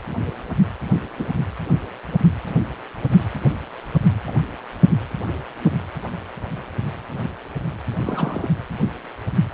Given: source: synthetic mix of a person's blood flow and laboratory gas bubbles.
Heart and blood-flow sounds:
Doppler ultrasound of blood flow; precordium
1.18-1.25 s: bubbles
4.26-4.45 s: bubbles
8.05-8.50 s: bubbles
From the record:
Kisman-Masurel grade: 122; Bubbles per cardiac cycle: 1 to 2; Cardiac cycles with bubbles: 10 to 50%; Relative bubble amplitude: moderate (0.250 to 0.450); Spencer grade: 2 (many but less than half of the cardiac periods contain bubble signals, singularly or in groups); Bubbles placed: anywhere in the cardiac cycle

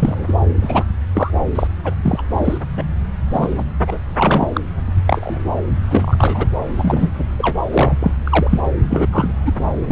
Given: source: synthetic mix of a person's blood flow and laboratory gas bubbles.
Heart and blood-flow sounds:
Doppler ultrasound of blood flow; subclavian vein
0.00-0.34 s: bubbles
0.61-0.84 s: bubbles
1.13-1.30 s: bubbles
1.55-1.67 s: bubbles
1.83-1.94 s: bubbles
2.03-2.22 s: bubbles
2.30-2.58 s: bubbles
2.77-2.85 s: bubbles
3.30-3.63 s: bubbles
3.87-3.98 s: bubbles
4.06-4.61 s: bubbles
5.06-5.62 s: bubbles
5.88-6.47 s: bubbles
6.78-7.11 s: bubbles
7.17-7.25 s: bubbles
7.38-7.62 s: bubbles
7.71-7.97 s: bubbles
8.00-8.11 s: bubbles
8.24-8.60 s: bubbles
8.89-9.07 s: bubbles
9.12-9.32 s: bubbles
9.45-9.53 s: bubbles
9.86-9.92 s: bubbles
From the record:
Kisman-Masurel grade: 243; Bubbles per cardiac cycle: several, 3 to 8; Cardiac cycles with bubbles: 100%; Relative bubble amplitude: loud (0.450 to 0.775); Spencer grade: 3 (all of the cardiac periods contain showers or single bubble signals, but not dominating or overriding the cardiac motion signals); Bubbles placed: anywhere in the cardiac cycle

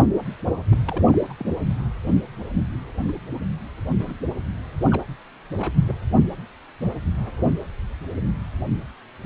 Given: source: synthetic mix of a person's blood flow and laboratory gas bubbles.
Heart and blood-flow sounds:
Doppler ultrasound of blood flow; precordium
0.71-0.79 s: bubbles
0.87-1.16 s: bubbles
1.29-1.33 s: bubbles
1.40-1.55 s: bubbles
3.07-3.11 s: bubbles
4.00-4.14 s: bubbles
4.80-5.06 s: bubbles
5.51-5.72 s: bubbles
5.87-5.92 s: bubbles
From the record:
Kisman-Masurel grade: 221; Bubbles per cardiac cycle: several, 3 to 8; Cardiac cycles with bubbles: 10 to 50%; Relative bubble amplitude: barely perceptible (0.100 to 0.250); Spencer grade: 2 (many but less than half of the cardiac periods contain bubble signals, singularly or in groups); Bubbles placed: anywhere in the cardiac cycle

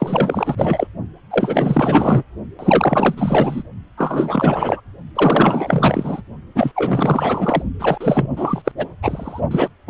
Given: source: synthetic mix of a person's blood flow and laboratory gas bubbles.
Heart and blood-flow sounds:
Doppler ultrasound of blood flow; precordium
0.00-0.87 s: bubbles
1.30-2.23 s: bubbles
2.59-3.63 s: bubbles
3.97-4.81 s: bubbles
5.15-6.22 s: bubbles
6.55-6.72 s: bubbles
6.76-7.62 s: bubbles
7.79-7.98 s: bubbles
8.01-8.62 s: bubbles
8.64-8.71 s: bubbles
8.78-8.86 s: bubbles
9.03-9.41 s: bubbles
9.51-9.68 s: bubbles
9.87-9.90 s: bubbles
From the record:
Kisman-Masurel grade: 444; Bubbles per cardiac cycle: continuous sound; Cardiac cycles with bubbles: 100%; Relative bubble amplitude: maximal (0.775 to 0.999); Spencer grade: 4 (maximum detectable bubble signal sounding continuously throughout systole and diastole of every cardiac period, and overriding the amplitude of the normal cardiac signals); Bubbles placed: only in the low amplitude regions of the cardiac cycle

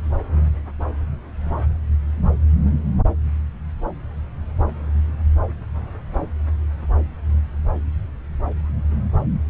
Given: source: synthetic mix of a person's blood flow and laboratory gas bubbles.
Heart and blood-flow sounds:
Doppler ultrasound of blood flow; subclavian vein
2.65-2.72 s: bubbles
From the record:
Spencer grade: 1 (occasional bubble signal discernible with the cardiac motion signal, with majority of cardiac periods free of bubbles); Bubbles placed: anywhere in the cardiac cycle

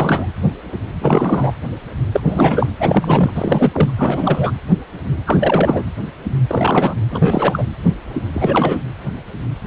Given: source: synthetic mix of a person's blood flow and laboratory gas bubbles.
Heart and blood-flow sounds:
Doppler ultrasound of blood flow; precordium
0.00-0.27 s: bubbles
1.01-1.53 s: bubbles
2.12-2.21 s: bubbles
2.25-2.67 s: bubbles
2.80-3.30 s: bubbles
3.34-3.92 s: bubbles
3.96-4.52 s: bubbles
5.26-5.83 s: bubbles
6.48-7.01 s: bubbles
7.10-7.64 s: bubbles
8.32-8.79 s: bubbles
From the record:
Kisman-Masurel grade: 333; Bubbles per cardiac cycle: rolling drumbeat, 9 or more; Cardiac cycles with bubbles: 50 to 99%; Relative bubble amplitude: loud (0.450 to 0.775); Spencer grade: 3 (all of the cardiac periods contain showers or single bubble signals, but not dominating or overriding the cardiac motion signals); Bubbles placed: anywhere in the cardiac cycle

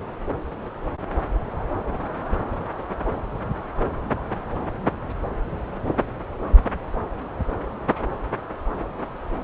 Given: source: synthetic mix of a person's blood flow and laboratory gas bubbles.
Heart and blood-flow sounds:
Doppler ultrasound of blood flow; subclavian vein
no bubbles
From the record:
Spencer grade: 0 (complete lack of bubble signals)

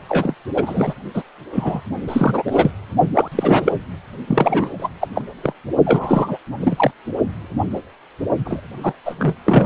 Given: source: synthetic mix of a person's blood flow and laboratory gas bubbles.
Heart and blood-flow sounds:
Doppler ultrasound of blood flow; precordium
0.08-0.34 s: bubbles
0.54-0.94 s: bubbles
1.14-1.23 s: bubbles
1.52-1.81 s: bubbles
2.08-2.42 s: bubbles
2.46-2.71 s: bubbles
3.15-3.28 s: bubbles
3.32-3.72 s: bubbles
4.28-4.89 s: bubbles
5.00-5.08 s: bubbles
5.15-5.23 s: bubbles
5.42-5.54 s: bubbles
5.85-6.38 s: bubbles
6.61-6.91 s: bubbles
8.45-8.61 s: bubbles
8.83-8.94 s: bubbles
9.05-9.14 s: bubbles
9.18-9.35 s: bubbles
9.45-9.66 s: bubbles
From the record:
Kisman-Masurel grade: 333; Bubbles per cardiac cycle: rolling drumbeat, 9 or more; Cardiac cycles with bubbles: 50 to 99%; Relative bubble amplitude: loud (0.450 to 0.775); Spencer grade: 3 (all of the cardiac periods contain showers or single bubble signals, but not dominating or overriding the cardiac motion signals); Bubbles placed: only in the low amplitude regions of the cardiac cycle

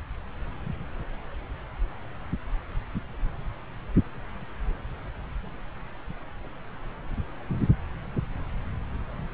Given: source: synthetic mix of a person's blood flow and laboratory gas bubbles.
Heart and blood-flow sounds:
Doppler ultrasound of blood flow; subclavian vein
no bubbles
From the record:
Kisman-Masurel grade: 000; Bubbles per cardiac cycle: 0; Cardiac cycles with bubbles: 0%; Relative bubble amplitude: no bubbles discernible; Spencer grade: 0 (complete lack of bubble signals)

